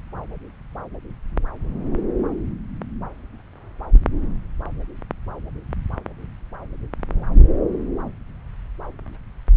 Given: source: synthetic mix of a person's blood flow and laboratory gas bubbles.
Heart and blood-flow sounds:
Doppler ultrasound of blood flow; subclavian vein
no bubbles
From the record:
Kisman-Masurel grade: 000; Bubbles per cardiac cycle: 0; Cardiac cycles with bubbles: 0%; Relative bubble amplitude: no bubbles discernible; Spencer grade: 0 (complete lack of bubble signals)

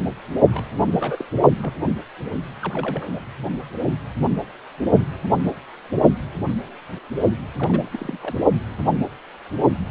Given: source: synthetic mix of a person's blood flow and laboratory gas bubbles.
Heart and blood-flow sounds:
Doppler ultrasound of blood flow; precordium
0.52-0.64 s: bubbles
0.87-0.94 s: bubbles
0.99-1.25 s: bubbles
1.62-1.73 s: bubbles
2.62-3.08 s: bubbles
3.12-3.21 s: bubbles
7.60-8.18 s: bubbles
8.21-8.35 s: bubbles
From the record:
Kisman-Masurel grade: 221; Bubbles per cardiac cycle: several, 3 to 8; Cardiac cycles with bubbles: 10 to 50%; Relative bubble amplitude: barely perceptible (0.100 to 0.250); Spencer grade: 2 (many but less than half of the cardiac periods contain bubble signals, singularly or in groups); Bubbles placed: only in the low amplitude regions of the cardiac cycle

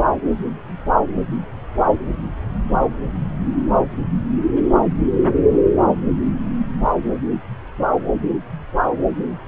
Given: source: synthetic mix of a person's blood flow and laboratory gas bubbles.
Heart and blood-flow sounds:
Doppler ultrasound of blood flow; subclavian vein
no bubbles
From the record:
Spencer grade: 0 (complete lack of bubble signals)

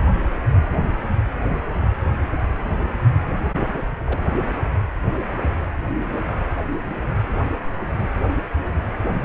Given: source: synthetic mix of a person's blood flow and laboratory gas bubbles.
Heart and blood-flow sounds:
Doppler ultrasound of blood flow; precordium
1.42-1.62 s: bubbles
4.00-4.21 s: bubbles
4.33-4.41 s: bubbles
5.12-5.20 s: bubbles
From the record:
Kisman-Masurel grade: 121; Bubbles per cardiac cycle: 1 to 2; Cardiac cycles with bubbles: 10 to 50%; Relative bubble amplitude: barely perceptible (0.100 to 0.250); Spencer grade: 2 (many but less than half of the cardiac periods contain bubble signals, singularly or in groups); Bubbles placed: anywhere in the cardiac cycle

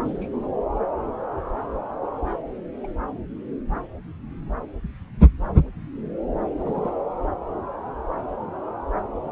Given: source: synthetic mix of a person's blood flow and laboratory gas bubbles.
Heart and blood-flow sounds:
Doppler ultrasound of blood flow; subclavian vein
0.04-0.52 s: bubbles
2.83-2.87 s: bubbles
6.56-6.94 s: bubbles
From the record:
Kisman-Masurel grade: 121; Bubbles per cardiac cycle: 1 to 2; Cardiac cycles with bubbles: 10 to 50%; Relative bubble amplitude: barely perceptible (0.100 to 0.250); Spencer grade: 2 (many but less than half of the cardiac periods contain bubble signals, singularly or in groups); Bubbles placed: anywhere in the cardiac cycle

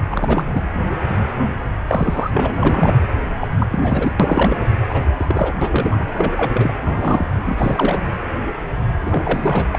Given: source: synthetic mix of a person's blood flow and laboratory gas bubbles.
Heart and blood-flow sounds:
Doppler ultrasound of blood flow; precordium
0.11-0.51 s: bubbles
0.53-0.65 s: bubbles
1.88-2.57 s: bubbles
2.62-2.96 s: bubbles
3.40-3.48 s: bubbles
3.60-3.67 s: bubbles
3.71-4.11 s: bubbles
4.19-4.57 s: bubbles
4.88-5.05 s: bubbles
5.18-5.25 s: bubbles
5.29-5.54 s: bubbles
5.61-6.05 s: bubbles
6.17-6.34 s: bubbles
6.36-6.73 s: bubbles
6.84-7.25 s: bubbles
7.46-8.03 s: bubbles
9.02-9.64 s: bubbles
9.71-9.79 s: bubbles
From the record:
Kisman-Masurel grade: 332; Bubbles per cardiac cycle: rolling drumbeat, 9 or more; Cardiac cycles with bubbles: 50 to 99%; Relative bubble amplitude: moderate (0.250 to 0.450); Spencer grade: 3 (all of the cardiac periods contain showers or single bubble signals, but not dominating or overriding the cardiac motion signals); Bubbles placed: anywhere in the cardiac cycle

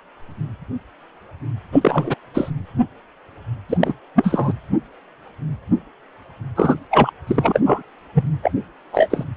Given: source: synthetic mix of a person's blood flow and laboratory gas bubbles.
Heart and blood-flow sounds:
Doppler ultrasound of blood flow; precordium
1.72-2.15 s: bubbles
2.34-2.50 s: bubbles
3.69-3.77 s: bubbles
3.80-3.94 s: bubbles
4.15-4.53 s: bubbles
6.56-6.75 s: bubbles
6.90-7.10 s: bubbles
7.26-7.60 s: bubbles
7.65-7.82 s: bubbles
8.14-8.24 s: bubbles
8.42-8.51 s: bubbles
8.92-9.23 s: bubbles
From the record:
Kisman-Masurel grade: 233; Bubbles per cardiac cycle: several, 3 to 8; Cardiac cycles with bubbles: 50 to 99%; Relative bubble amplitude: loud (0.450 to 0.775); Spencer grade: 3 (all of the cardiac periods contain showers or single bubble signals, but not dominating or overriding the cardiac motion signals); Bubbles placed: anywhere in the cardiac cycle

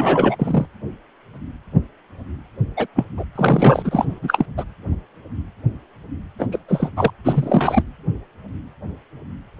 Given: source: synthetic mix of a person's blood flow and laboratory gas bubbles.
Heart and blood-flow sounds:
Doppler ultrasound of blood flow; precordium
0.00-0.36 s: bubbles
0.39-0.66 s: bubbles
2.77-2.86 s: bubbles
2.96-3.04 s: bubbles
3.17-3.25 s: bubbles
3.35-4.46 s: bubbles
4.57-4.64 s: bubbles
6.38-6.47 s: bubbles
6.51-6.58 s: bubbles
6.68-6.89 s: bubbles
6.96-7.10 s: bubbles
7.24-7.83 s: bubbles
From the record:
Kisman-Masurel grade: 223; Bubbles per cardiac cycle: several, 3 to 8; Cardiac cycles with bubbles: 10 to 50%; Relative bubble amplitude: loud (0.450 to 0.775); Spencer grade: 2 (many but less than half of the cardiac periods contain bubble signals, singularly or in groups); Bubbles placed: anywhere in the cardiac cycle

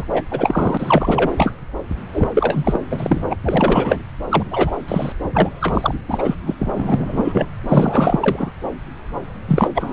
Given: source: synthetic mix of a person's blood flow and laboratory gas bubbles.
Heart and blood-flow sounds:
Doppler ultrasound of blood flow; subclavian vein
0.00-0.04 s: bubbles
0.12-0.23 s: bubbles
0.31-1.30 s: bubbles
1.37-1.52 s: bubbles
2.14-2.29 s: bubbles
2.35-2.80 s: bubbles
2.90-3.21 s: bubbles
3.30-3.36 s: bubbles
3.44-3.98 s: bubbles
4.29-4.46 s: bubbles
4.51-4.72 s: bubbles
4.88-5.12 s: bubbles
5.33-5.49 s: bubbles
5.60-5.94 s: bubbles
6.08-6.35 s: bubbles
6.46-6.54 s: bubbles
6.59-7.46 s: bubbles
7.68-8.51 s: bubbles
9.48-9.69 s: bubbles
9.74-9.93 s: bubbles
From the record:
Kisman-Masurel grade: 333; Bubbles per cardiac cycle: rolling drumbeat, 9 or more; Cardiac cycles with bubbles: 50 to 99%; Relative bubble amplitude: loud (0.450 to 0.775); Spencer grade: 3 (all of the cardiac periods contain showers or single bubble signals, but not dominating or overriding the cardiac motion signals); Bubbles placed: anywhere in the cardiac cycle

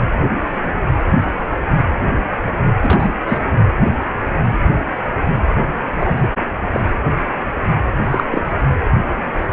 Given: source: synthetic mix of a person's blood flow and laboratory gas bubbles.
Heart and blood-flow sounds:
Doppler ultrasound of blood flow; precordium
2.81-3.08 s: bubbles
3.27-3.40 s: bubbles
5.94-6.29 s: bubbles
6.73-6.80 s: bubbles
8.10-8.24 s: bubbles
8.31-8.46 s: bubbles
From the record:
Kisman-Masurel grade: 123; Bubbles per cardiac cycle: 1 to 2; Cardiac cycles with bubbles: 10 to 50%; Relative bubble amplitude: loud (0.450 to 0.775); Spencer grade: 2 (many but less than half of the cardiac periods contain bubble signals, singularly or in groups); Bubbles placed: anywhere in the cardiac cycle

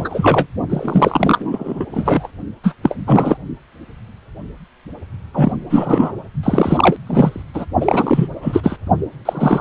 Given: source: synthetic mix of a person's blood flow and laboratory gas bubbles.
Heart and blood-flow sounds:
Doppler ultrasound of blood flow; precordium
0.00-0.47 s: bubbles
0.69-1.85 s: bubbles
1.91-2.28 s: bubbles
2.64-2.75 s: bubbles
2.83-2.95 s: bubbles
3.06-3.37 s: bubbles
5.33-5.52 s: bubbles
5.69-6.13 s: bubbles
6.43-6.96 s: bubbles
7.06-7.43 s: bubbles
7.54-7.65 s: bubbles
7.80-8.28 s: bubbles
8.41-8.78 s: bubbles
9.25-9.61 s: bubbles
From the record:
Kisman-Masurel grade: 333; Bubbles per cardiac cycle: rolling drumbeat, 9 or more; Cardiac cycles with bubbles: 50 to 99%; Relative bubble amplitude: loud (0.450 to 0.775); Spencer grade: 3 (all of the cardiac periods contain showers or single bubble signals, but not dominating or overriding the cardiac motion signals); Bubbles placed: only in the low amplitude regions of the cardiac cycle

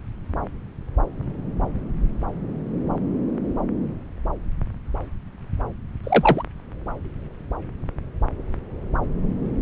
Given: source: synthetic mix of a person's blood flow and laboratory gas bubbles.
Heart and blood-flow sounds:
Doppler ultrasound of blood flow; subclavian vein
6.03-6.42 s: bubbles
From the record:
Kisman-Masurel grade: 113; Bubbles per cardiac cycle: 1 to 2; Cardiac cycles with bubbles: 1 to 10%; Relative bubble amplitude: loud (0.450 to 0.775); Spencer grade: 1 (occasional bubble signal discernible with the cardiac motion signal, with majority of cardiac periods free of bubbles); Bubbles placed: anywhere in the cardiac cycle

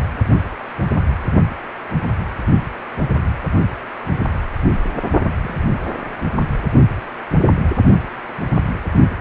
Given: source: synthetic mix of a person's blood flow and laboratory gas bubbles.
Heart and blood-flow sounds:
Doppler ultrasound of blood flow; precordium
5.43-5.61 s: bubbles
From the record:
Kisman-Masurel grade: 111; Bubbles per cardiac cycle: 1 to 2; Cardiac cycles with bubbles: 1 to 10%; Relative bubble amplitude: barely perceptible (0.100 to 0.250); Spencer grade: 1 (occasional bubble signal discernible with the cardiac motion signal, with majority of cardiac periods free of bubbles); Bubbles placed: only in the low amplitude regions of the cardiac cycle

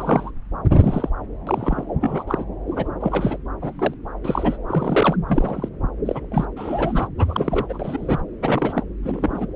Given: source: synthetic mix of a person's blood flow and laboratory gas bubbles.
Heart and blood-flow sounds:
Doppler ultrasound of blood flow; subclavian vein
0.00-0.31 s: bubbles
0.71-1.09 s: bubbles
1.46-1.85 s: bubbles
1.99-2.24 s: bubbles
2.27-2.45 s: bubbles
2.69-2.88 s: bubbles
3.00-3.37 s: bubbles
3.62-3.94 s: bubbles
4.24-4.57 s: bubbles
4.67-5.16 s: bubbles
5.27-5.69 s: bubbles
6.05-6.48 s: bubbles
6.57-7.08 s: bubbles
7.17-8.22 s: bubbles
8.41-8.84 s: bubbles
9.03-9.46 s: bubbles
From the record:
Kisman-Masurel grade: 242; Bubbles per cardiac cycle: several, 3 to 8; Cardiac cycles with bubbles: 100%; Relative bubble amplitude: moderate (0.250 to 0.450); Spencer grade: 3 (all of the cardiac periods contain showers or single bubble signals, but not dominating or overriding the cardiac motion signals); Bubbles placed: anywhere in the cardiac cycle

